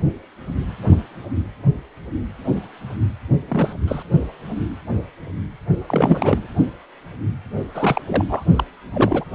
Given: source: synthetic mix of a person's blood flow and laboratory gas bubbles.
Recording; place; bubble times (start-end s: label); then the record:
Doppler ultrasound of blood flow; precordium
3.48-3.74 s: bubbles
3.87-4.03 s: bubbles
5.88-6.47 s: bubbles
7.74-8.01 s: bubbles
8.06-8.25 s: bubbles
8.29-8.43 s: bubbles
8.55-8.63 s: bubbles
8.93-9.24 s: bubbles
From the record:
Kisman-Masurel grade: 232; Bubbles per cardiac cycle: several, 3 to 8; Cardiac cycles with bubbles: 50 to 99%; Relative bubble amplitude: moderate (0.250 to 0.450); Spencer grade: 3 (all of the cardiac periods contain showers or single bubble signals, but not dominating or overriding the cardiac motion signals); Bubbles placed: only in the low amplitude regions of the cardiac cycle